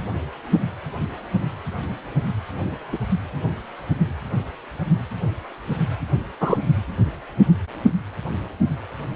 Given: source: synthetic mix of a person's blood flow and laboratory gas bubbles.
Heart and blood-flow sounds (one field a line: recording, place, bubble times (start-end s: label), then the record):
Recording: Doppler ultrasound of blood flow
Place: precordium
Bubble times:
2.92-2.99 s: bubbles
6.40-6.58 s: bubbles
From the record:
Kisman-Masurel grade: 123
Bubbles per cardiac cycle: 1 to 2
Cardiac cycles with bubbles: 10 to 50%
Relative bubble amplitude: loud (0.450 to 0.775)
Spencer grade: 2 (many but less than half of the cardiac periods contain bubble signals, singularly or in groups)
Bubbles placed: only in the low amplitude regions of the cardiac cycle